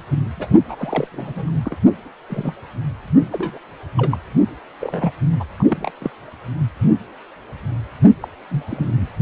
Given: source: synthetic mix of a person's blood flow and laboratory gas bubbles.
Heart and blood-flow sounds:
Doppler ultrasound of blood flow; precordium
0.36-0.47 s: bubbles
0.68-0.76 s: bubbles
0.78-1.08 s: bubbles
1.12-1.52 s: bubbles
1.65-1.77 s: bubbles
1.86-1.90 s: bubbles
2.29-2.55 s: bubbles
3.31-3.58 s: bubbles
3.97-4.17 s: bubbles
4.80-5.12 s: bubbles
5.39-5.43 s: bubbles
5.59-5.63 s: bubbles
5.70-5.91 s: bubbles
6.00-6.10 s: bubbles
8.22-8.28 s: bubbles
8.50-9.08 s: bubbles
From the record:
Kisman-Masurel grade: 232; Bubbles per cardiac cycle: several, 3 to 8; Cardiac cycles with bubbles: 50 to 99%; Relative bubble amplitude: moderate (0.250 to 0.450); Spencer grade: 3 (all of the cardiac periods contain showers or single bubble signals, but not dominating or overriding the cardiac motion signals); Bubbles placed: anywhere in the cardiac cycle

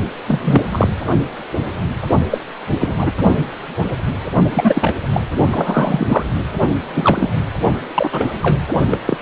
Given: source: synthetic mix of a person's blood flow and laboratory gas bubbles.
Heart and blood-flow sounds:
Doppler ultrasound of blood flow; precordium
0.27-0.63 s: bubbles
0.71-0.89 s: bubbles
2.30-2.38 s: bubbles
2.79-3.11 s: bubbles
4.50-4.96 s: bubbles
5.12-5.21 s: bubbles
5.51-6.23 s: bubbles
6.93-7.43 s: bubbles
7.94-8.33 s: bubbles
8.42-8.62 s: bubbles
8.90-8.98 s: bubbles
9.06-9.18 s: bubbles
From the record:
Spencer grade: 3 (all of the cardiac periods contain showers or single bubble signals, but not dominating or overriding the cardiac motion signals); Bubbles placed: only in the low amplitude regions of the cardiac cycle

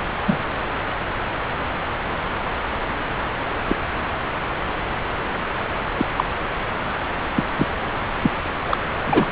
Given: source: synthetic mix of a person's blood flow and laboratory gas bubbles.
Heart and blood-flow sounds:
Doppler ultrasound of blood flow; subclavian vein
0.27-0.37 s: bubbles
3.67-3.76 s: bubbles
5.97-6.05 s: bubbles
6.16-6.24 s: bubbles
7.36-7.44 s: bubbles
7.56-7.67 s: bubbles
8.21-8.30 s: bubbles
8.66-8.77 s: bubbles
9.04-9.32 s: bubbles
From the record:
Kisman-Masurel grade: 123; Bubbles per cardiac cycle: 1 to 2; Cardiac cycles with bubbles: 10 to 50%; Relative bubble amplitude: loud (0.450 to 0.775); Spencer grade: 2 (many but less than half of the cardiac periods contain bubble signals, singularly or in groups); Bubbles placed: anywhere in the cardiac cycle

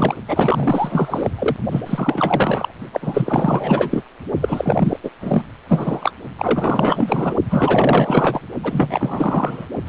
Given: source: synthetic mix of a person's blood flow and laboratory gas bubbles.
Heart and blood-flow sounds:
Doppler ultrasound of blood flow; precordium
0.00-0.15 s: bubbles
0.27-1.30 s: bubbles
1.39-1.56 s: bubbles
1.71-1.81 s: bubbles
1.86-2.72 s: bubbles
2.92-4.04 s: bubbles
4.41-4.99 s: bubbles
5.03-5.11 s: bubbles
5.21-5.42 s: bubbles
5.69-6.12 s: bubbles
6.38-7.35 s: bubbles
7.50-8.40 s: bubbles
8.63-9.66 s: bubbles
9.86-9.89 s: bubbles
From the record:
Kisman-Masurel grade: 444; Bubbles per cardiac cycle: continuous sound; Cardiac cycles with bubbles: 100%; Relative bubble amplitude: maximal (0.775 to 0.999); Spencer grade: 4 (maximum detectable bubble signal sounding continuously throughout systole and diastole of every cardiac period, and overriding the amplitude of the normal cardiac signals); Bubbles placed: only in the low amplitude regions of the cardiac cycle

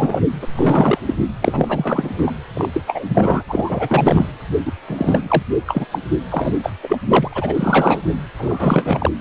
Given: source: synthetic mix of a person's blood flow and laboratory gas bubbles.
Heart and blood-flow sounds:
Doppler ultrasound of blood flow; precordium
0.00-0.22 s: bubbles
0.41-0.47 s: bubbles
0.53-0.98 s: bubbles
1.06-1.15 s: bubbles
1.41-2.32 s: bubbles
2.54-2.70 s: bubbles
2.73-2.81 s: bubbles
2.87-3.05 s: bubbles
3.08-3.43 s: bubbles
3.48-4.26 s: bubbles
4.66-4.73 s: bubbles
4.87-5.42 s: bubbles
5.67-5.86 s: bubbles
5.92-5.99 s: bubbles
6.30-6.53 s: bubbles
6.62-6.71 s: bubbles
6.83-6.98 s: bubbles
7.08-7.29 s: bubbles
7.32-8.02 s: bubbles
8.38-9.11 s: bubbles
From the record:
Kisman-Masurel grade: 343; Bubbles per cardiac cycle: rolling drumbeat, 9 or more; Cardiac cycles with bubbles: 100%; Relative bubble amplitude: loud (0.450 to 0.775); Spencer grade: 3 (all of the cardiac periods contain showers or single bubble signals, but not dominating or overriding the cardiac motion signals); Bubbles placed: anywhere in the cardiac cycle

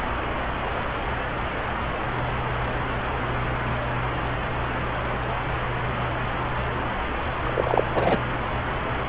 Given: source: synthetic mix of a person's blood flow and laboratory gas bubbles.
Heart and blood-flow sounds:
Doppler ultrasound of blood flow; subclavian vein
7.43-7.83 s: bubbles
7.95-8.17 s: bubbles
From the record:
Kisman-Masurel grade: 213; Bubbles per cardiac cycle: several, 3 to 8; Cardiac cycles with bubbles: 1 to 10%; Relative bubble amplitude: loud (0.450 to 0.775); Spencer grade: 1 (occasional bubble signal discernible with the cardiac motion signal, with majority of cardiac periods free of bubbles); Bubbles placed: anywhere in the cardiac cycle

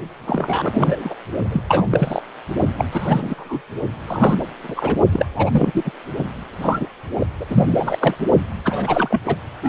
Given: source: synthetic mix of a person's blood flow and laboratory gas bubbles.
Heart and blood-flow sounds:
Doppler ultrasound of blood flow; precordium
0.27-1.15 s: bubbles
1.52-1.62 s: bubbles
1.67-1.86 s: bubbles
1.91-2.22 s: bubbles
2.77-2.85 s: bubbles
2.91-3.61 s: bubbles
4.07-4.38 s: bubbles
4.63-4.95 s: bubbles
5.13-5.26 s: bubbles
5.35-5.71 s: bubbles
5.74-5.91 s: bubbles
6.62-6.86 s: bubbles
7.15-7.27 s: bubbles
7.40-7.46 s: bubbles
7.49-7.98 s: bubbles
8.00-8.14 s: bubbles
8.64-9.21 s: bubbles
9.25-9.35 s: bubbles
9.62-9.69 s: bubbles
From the record:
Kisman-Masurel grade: 342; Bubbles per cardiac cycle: rolling drumbeat, 9 or more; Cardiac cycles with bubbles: 100%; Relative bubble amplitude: moderate (0.250 to 0.450); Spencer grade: 3 (all of the cardiac periods contain showers or single bubble signals, but not dominating or overriding the cardiac motion signals); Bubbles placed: only in the low amplitude regions of the cardiac cycle

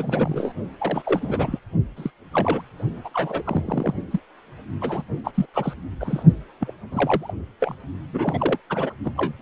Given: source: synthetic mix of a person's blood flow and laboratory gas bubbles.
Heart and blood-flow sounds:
Doppler ultrasound of blood flow; precordium
0.00-0.53 s: bubbles
0.80-1.59 s: bubbles
1.96-2.10 s: bubbles
2.32-2.61 s: bubbles
3.04-3.09 s: bubbles
3.14-3.94 s: bubbles
4.11-4.20 s: bubbles
4.81-5.02 s: bubbles
5.24-5.31 s: bubbles
5.35-5.46 s: bubbles
5.54-5.74 s: bubbles
6.00-6.23 s: bubbles
6.61-6.73 s: bubbles
6.92-7.32 s: bubbles
7.61-7.74 s: bubbles
8.12-8.58 s: bubbles
8.70-8.93 s: bubbles
9.04-9.13 s: bubbles
9.16-9.33 s: bubbles
From the record:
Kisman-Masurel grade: 242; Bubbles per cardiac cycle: several, 3 to 8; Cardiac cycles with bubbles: 100%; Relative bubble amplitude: moderate (0.250 to 0.450); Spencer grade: 3 (all of the cardiac periods contain showers or single bubble signals, but not dominating or overriding the cardiac motion signals); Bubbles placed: only in the low amplitude regions of the cardiac cycle

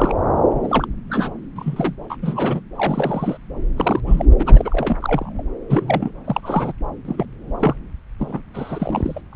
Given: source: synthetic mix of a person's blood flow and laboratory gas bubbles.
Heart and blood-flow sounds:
Doppler ultrasound of blood flow; subclavian vein
0.00-0.13 s: bubbles
0.54-0.86 s: bubbles
1.09-1.30 s: bubbles
1.55-1.95 s: bubbles
2.09-2.16 s: bubbles
2.22-2.60 s: bubbles
2.76-3.38 s: bubbles
3.76-4.00 s: bubbles
4.07-4.25 s: bubbles
4.39-4.96 s: bubbles
5.00-5.43 s: bubbles
5.69-6.11 s: bubbles
6.25-6.73 s: bubbles
7.05-7.25 s: bubbles
7.60-7.75 s: bubbles
8.19-8.42 s: bubbles
8.54-9.21 s: bubbles
9.32-9.36 s: bubbles
From the record:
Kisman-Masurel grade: 242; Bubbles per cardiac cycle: several, 3 to 8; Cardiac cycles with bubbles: 100%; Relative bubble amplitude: moderate (0.250 to 0.450); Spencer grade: 3 (all of the cardiac periods contain showers or single bubble signals, but not dominating or overriding the cardiac motion signals); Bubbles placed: anywhere in the cardiac cycle

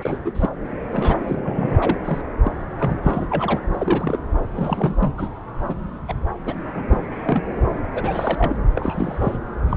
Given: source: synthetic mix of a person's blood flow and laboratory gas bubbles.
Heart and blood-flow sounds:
Doppler ultrasound of blood flow; subclavian vein
0.01-0.17 s: bubbles
0.24-0.50 s: bubbles
0.92-1.78 s: bubbles
1.81-1.97 s: bubbles
2.05-2.21 s: bubbles
2.45-2.52 s: bubbles
2.80-2.96 s: bubbles
3.04-3.28 s: bubbles
3.30-3.63 s: bubbles
3.72-4.20 s: bubbles
4.56-5.12 s: bubbles
5.17-5.29 s: bubbles
5.60-5.75 s: bubbles
6.08-6.15 s: bubbles
6.46-6.54 s: bubbles
6.64-6.83 s: bubbles
6.89-7.03 s: bubbles
7.11-7.45 s: bubbles
7.94-8.58 s: bubbles
8.75-9.38 s: bubbles
9.71-9.77 s: bubbles
From the record:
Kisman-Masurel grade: 242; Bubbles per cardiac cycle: several, 3 to 8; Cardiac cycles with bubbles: 100%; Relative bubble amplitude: moderate (0.250 to 0.450); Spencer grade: 3 (all of the cardiac periods contain showers or single bubble signals, but not dominating or overriding the cardiac motion signals); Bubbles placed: anywhere in the cardiac cycle

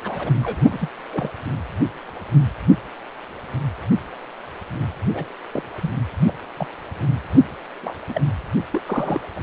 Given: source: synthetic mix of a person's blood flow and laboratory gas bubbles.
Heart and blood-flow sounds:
Doppler ultrasound of blood flow; precordium
0.04-0.33 s: bubbles
0.43-0.89 s: bubbles
1.11-1.31 s: bubbles
5.14-5.25 s: bubbles
5.52-5.62 s: bubbles
5.76-5.91 s: bubbles
6.27-6.32 s: bubbles
6.57-6.67 s: bubbles
7.83-7.95 s: bubbles
8.08-8.21 s: bubbles
8.72-8.82 s: bubbles
8.86-9.21 s: bubbles
9.36-9.39 s: bubbles
From the record:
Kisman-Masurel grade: 221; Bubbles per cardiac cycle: several, 3 to 8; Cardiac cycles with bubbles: 10 to 50%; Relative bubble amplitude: barely perceptible (0.100 to 0.250); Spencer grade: 2 (many but less than half of the cardiac periods contain bubble signals, singularly or in groups); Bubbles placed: only in the low amplitude regions of the cardiac cycle

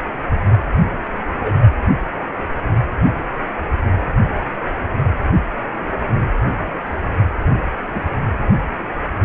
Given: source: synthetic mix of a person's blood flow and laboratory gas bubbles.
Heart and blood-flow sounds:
Doppler ultrasound of blood flow; precordium
1.38-1.68 s: bubbles
7.92-8.01 s: bubbles
From the record:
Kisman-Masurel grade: 122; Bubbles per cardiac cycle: 1 to 2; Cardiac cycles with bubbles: 10 to 50%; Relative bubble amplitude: moderate (0.250 to 0.450); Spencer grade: 2 (many but less than half of the cardiac periods contain bubble signals, singularly or in groups); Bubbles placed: anywhere in the cardiac cycle

